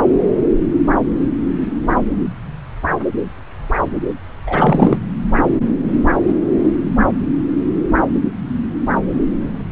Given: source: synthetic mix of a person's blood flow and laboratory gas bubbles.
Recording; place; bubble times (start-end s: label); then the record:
Doppler ultrasound of blood flow; subclavian vein
4.47-4.97 s: bubbles
From the record:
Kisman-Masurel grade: 213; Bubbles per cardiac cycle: several, 3 to 8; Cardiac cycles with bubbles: 1 to 10%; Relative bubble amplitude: loud (0.450 to 0.775); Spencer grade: 1 (occasional bubble signal discernible with the cardiac motion signal, with majority of cardiac periods free of bubbles); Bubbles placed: anywhere in the cardiac cycle